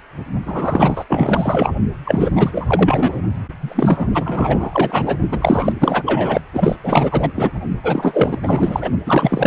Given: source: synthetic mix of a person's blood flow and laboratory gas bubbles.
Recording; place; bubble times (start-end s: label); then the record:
Doppler ultrasound of blood flow; precordium
0.46-1.05 s: bubbles
1.08-1.74 s: bubbles
2.04-2.31 s: bubbles
2.35-3.23 s: bubbles
3.60-4.07 s: bubbles
4.14-5.18 s: bubbles
5.32-5.73 s: bubbles
5.80-6.03 s: bubbles
6.06-6.41 s: bubbles
6.53-6.76 s: bubbles
6.83-7.29 s: bubbles
7.36-7.52 s: bubbles
7.83-8.38 s: bubbles
8.42-8.89 s: bubbles
9.06-9.47 s: bubbles
From the record:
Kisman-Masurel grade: 444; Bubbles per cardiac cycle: continuous sound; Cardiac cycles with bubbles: 100%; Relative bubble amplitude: maximal (0.775 to 0.999); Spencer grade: 4 (maximum detectable bubble signal sounding continuously throughout systole and diastole of every cardiac period, and overriding the amplitude of the normal cardiac signals); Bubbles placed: only in the low amplitude regions of the cardiac cycle